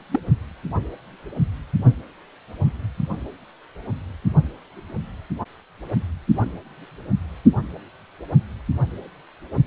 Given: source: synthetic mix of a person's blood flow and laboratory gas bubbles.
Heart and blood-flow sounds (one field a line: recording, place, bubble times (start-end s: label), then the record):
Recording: Doppler ultrasound of blood flow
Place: precordium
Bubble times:
0.11-0.20 s: bubbles
From the record:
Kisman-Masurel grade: 112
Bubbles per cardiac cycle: 1 to 2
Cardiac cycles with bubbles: 1 to 10%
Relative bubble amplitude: moderate (0.250 to 0.450)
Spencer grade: 1 (occasional bubble signal discernible with the cardiac motion signal, with majority of cardiac periods free of bubbles)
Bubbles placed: anywhere in the cardiac cycle